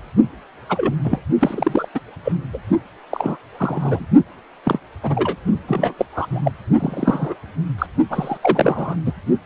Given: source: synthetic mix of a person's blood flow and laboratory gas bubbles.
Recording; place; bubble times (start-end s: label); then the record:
Doppler ultrasound of blood flow; precordium
0.68-0.96 s: bubbles
1.03-1.19 s: bubbles
1.39-1.89 s: bubbles
1.95-2.00 s: bubbles
2.25-2.33 s: bubbles
2.53-2.58 s: bubbles
3.10-3.37 s: bubbles
3.58-4.06 s: bubbles
4.65-4.79 s: bubbles
5.03-5.36 s: bubbles
5.67-5.93 s: bubbles
5.98-6.05 s: bubbles
6.12-6.51 s: bubbles
6.79-7.34 s: bubbles
7.78-7.86 s: bubbles
8.10-8.38 s: bubbles
8.42-8.96 s: bubbles
9.06-9.13 s: bubbles
From the record:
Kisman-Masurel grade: 232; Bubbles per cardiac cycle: several, 3 to 8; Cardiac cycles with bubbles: 50 to 99%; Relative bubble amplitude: moderate (0.250 to 0.450); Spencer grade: 3 (all of the cardiac periods contain showers or single bubble signals, but not dominating or overriding the cardiac motion signals); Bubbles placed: only in the low amplitude regions of the cardiac cycle